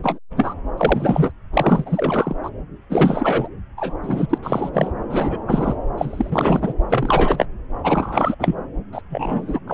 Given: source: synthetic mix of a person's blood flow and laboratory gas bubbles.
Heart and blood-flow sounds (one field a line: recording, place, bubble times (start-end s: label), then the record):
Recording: Doppler ultrasound of blood flow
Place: subclavian vein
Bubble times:
0.02-0.18 s: bubbles
0.37-0.54 s: bubbles
0.77-1.31 s: bubbles
1.53-2.35 s: bubbles
2.43-2.50 s: bubbles
2.89-3.49 s: bubbles
3.77-3.94 s: bubbles
4.03-4.38 s: bubbles
4.42-4.71 s: bubbles
4.74-4.92 s: bubbles
5.09-5.76 s: bubbles
5.98-6.73 s: bubbles
6.90-7.46 s: bubbles
7.83-8.35 s: bubbles
8.39-8.55 s: bubbles
8.92-9.01 s: bubbles
9.09-9.59 s: bubbles
9.67-9.74 s: bubbles
From the record:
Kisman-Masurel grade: 343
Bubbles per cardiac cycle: rolling drumbeat, 9 or more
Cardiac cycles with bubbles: 100%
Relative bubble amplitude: loud (0.450 to 0.775)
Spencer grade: 3 (all of the cardiac periods contain showers or single bubble signals, but not dominating or overriding the cardiac motion signals)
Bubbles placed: anywhere in the cardiac cycle